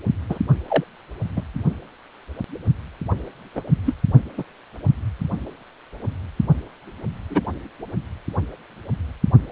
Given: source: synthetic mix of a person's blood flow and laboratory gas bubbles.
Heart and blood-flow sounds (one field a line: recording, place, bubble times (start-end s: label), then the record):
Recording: Doppler ultrasound of blood flow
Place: precordium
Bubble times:
0.29-0.39 s: bubbles
0.68-0.84 s: bubbles
1.36-1.42 s: bubbles
3.55-3.62 s: bubbles
3.85-3.94 s: bubbles
4.37-4.44 s: bubbles
7.30-7.41 s: bubbles
From the record:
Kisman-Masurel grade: 122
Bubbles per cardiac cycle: 1 to 2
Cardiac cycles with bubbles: 10 to 50%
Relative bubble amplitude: moderate (0.250 to 0.450)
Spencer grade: 2 (many but less than half of the cardiac periods contain bubble signals, singularly or in groups)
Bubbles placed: only in the low amplitude regions of the cardiac cycle